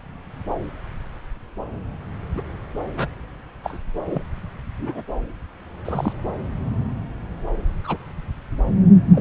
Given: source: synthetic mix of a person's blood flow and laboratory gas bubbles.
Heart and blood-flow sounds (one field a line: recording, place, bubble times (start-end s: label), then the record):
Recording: Doppler ultrasound of blood flow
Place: subclavian vein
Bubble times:
2.37-2.42 s: bubbles
2.96-3.08 s: bubbles
3.63-3.78 s: bubbles
4.06-4.22 s: bubbles
4.79-5.02 s: bubbles
5.85-6.12 s: bubbles
7.84-7.97 s: bubbles
9.13-9.21 s: bubbles
From the record:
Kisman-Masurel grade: 122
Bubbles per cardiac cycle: 1 to 2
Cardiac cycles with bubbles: 10 to 50%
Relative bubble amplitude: moderate (0.250 to 0.450)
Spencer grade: 2 (many but less than half of the cardiac periods contain bubble signals, singularly or in groups)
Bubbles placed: anywhere in the cardiac cycle